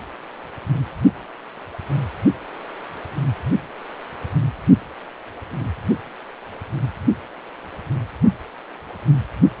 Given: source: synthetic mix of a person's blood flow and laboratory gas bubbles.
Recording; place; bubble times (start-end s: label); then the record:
Doppler ultrasound of blood flow; precordium
no bubbles
From the record:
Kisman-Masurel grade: 000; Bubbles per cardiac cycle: 0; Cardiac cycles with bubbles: 0%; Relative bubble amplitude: no bubbles discernible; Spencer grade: 0 (complete lack of bubble signals)